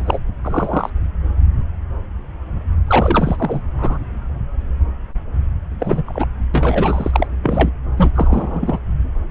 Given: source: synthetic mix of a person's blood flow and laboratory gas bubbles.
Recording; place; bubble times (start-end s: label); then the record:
Doppler ultrasound of blood flow; subclavian vein
0.00-0.19 s: bubbles
0.43-0.90 s: bubbles
2.87-3.61 s: bubbles
3.77-3.98 s: bubbles
5.79-6.03 s: bubbles
6.06-6.25 s: bubbles
6.54-7.27 s: bubbles
7.42-7.71 s: bubbles
7.97-8.10 s: bubbles
8.14-8.79 s: bubbles
From the record:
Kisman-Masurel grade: 233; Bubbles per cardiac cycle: several, 3 to 8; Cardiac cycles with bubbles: 50 to 99%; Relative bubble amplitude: loud (0.450 to 0.775); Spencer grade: 3 (all of the cardiac periods contain showers or single bubble signals, but not dominating or overriding the cardiac motion signals); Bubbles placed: anywhere in the cardiac cycle